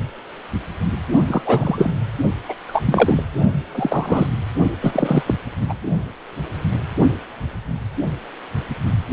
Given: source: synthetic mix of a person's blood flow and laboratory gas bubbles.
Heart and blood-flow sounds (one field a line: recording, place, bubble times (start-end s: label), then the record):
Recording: Doppler ultrasound of blood flow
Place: precordium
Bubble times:
1.27-1.42 s: bubbles
1.45-1.91 s: bubbles
2.48-2.54 s: bubbles
2.67-3.23 s: bubbles
3.74-4.26 s: bubbles
4.81-5.22 s: bubbles
5.26-5.34 s: bubbles
5.68-5.73 s: bubbles
From the record:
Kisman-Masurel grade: 223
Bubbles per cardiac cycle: several, 3 to 8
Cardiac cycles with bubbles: 10 to 50%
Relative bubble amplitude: loud (0.450 to 0.775)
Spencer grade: 2 (many but less than half of the cardiac periods contain bubble signals, singularly or in groups)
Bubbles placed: only in the low amplitude regions of the cardiac cycle